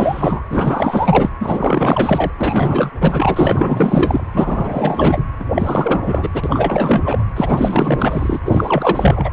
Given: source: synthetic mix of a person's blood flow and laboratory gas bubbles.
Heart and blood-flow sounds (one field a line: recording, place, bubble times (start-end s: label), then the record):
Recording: Doppler ultrasound of blood flow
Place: precordium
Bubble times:
0.00-0.42 s: bubbles
0.49-1.29 s: bubbles
1.41-2.31 s: bubbles
2.39-2.90 s: bubbles
3.01-4.24 s: bubbles
4.33-5.23 s: bubbles
5.40-5.45 s: bubbles
5.54-6.29 s: bubbles
6.33-7.25 s: bubbles
7.36-8.39 s: bubbles
8.44-9.31 s: bubbles
From the record:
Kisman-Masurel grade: 444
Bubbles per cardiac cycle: continuous sound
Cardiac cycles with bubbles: 100%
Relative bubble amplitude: maximal (0.775 to 0.999)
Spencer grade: 4 (maximum detectable bubble signal sounding continuously throughout systole and diastole of every cardiac period, and overriding the amplitude of the normal cardiac signals)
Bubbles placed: anywhere in the cardiac cycle